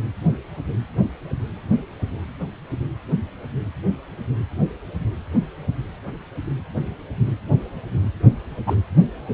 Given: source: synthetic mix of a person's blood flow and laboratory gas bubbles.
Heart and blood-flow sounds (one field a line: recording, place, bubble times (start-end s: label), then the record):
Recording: Doppler ultrasound of blood flow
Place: precordium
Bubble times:
8.66-8.75 s: bubbles
From the record:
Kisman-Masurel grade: 113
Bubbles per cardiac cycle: 1 to 2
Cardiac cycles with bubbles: 1 to 10%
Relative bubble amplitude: loud (0.450 to 0.775)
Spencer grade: 1 (occasional bubble signal discernible with the cardiac motion signal, with majority of cardiac periods free of bubbles)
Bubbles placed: anywhere in the cardiac cycle